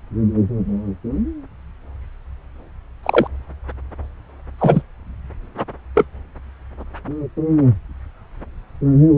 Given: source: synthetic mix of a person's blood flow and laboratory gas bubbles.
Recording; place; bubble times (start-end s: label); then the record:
Doppler ultrasound of blood flow; subclavian vein
3.03-3.28 s: bubbles
4.58-4.82 s: bubbles
5.95-6.05 s: bubbles
From the record:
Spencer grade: 2 (many but less than half of the cardiac periods contain bubble signals, singularly or in groups); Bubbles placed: anywhere in the cardiac cycle